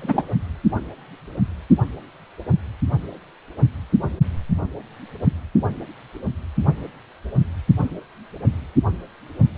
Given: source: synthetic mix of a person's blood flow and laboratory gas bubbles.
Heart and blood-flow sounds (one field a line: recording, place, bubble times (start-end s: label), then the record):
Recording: Doppler ultrasound of blood flow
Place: precordium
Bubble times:
0.00-0.23 s: bubbles
From the record:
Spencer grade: 1 (occasional bubble signal discernible with the cardiac motion signal, with majority of cardiac periods free of bubbles)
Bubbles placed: only in the low amplitude regions of the cardiac cycle